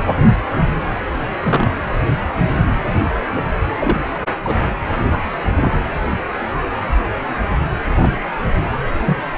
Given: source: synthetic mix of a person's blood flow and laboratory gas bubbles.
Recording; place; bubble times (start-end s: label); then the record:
Doppler ultrasound of blood flow; precordium
1.43-1.71 s: bubbles
3.35-3.42 s: bubbles
3.77-4.16 s: bubbles
4.44-4.57 s: bubbles
5.09-5.22 s: bubbles
5.59-5.71 s: bubbles
8.03-8.08 s: bubbles
9.05-9.17 s: bubbles
From the record:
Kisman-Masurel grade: 122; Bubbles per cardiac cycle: 1 to 2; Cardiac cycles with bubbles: 10 to 50%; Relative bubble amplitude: moderate (0.250 to 0.450); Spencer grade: 2 (many but less than half of the cardiac periods contain bubble signals, singularly or in groups); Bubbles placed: anywhere in the cardiac cycle